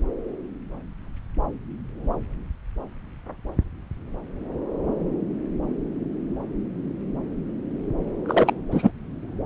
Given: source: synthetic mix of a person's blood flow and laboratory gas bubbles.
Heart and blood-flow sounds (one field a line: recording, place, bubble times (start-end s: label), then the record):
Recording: Doppler ultrasound of blood flow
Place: subclavian vein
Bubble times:
8.26-8.54 s: bubbles
8.71-8.90 s: bubbles
From the record:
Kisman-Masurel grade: 212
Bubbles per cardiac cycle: several, 3 to 8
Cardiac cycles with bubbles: 1 to 10%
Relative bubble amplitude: moderate (0.250 to 0.450)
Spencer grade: 1 (occasional bubble signal discernible with the cardiac motion signal, with majority of cardiac periods free of bubbles)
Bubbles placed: anywhere in the cardiac cycle